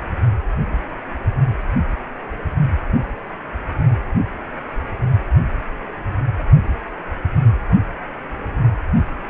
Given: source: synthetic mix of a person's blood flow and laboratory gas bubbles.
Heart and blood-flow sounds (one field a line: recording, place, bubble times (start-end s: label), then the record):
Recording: Doppler ultrasound of blood flow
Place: precordium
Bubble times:
no bubbles
From the record:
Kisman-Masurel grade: 000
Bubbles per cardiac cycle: 0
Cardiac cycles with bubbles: 0%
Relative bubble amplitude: no bubbles discernible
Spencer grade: 0 (complete lack of bubble signals)